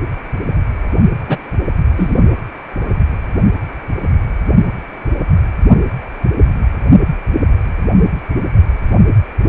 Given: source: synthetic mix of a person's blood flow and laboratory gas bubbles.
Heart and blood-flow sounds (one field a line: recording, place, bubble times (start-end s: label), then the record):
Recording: Doppler ultrasound of blood flow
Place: precordium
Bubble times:
1.28-1.38 s: bubbles
1.96-2.15 s: bubbles
From the record:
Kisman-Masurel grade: 113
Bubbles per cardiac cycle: 1 to 2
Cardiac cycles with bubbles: 1 to 10%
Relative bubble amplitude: loud (0.450 to 0.775)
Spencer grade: 1 (occasional bubble signal discernible with the cardiac motion signal, with majority of cardiac periods free of bubbles)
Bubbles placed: only in the low amplitude regions of the cardiac cycle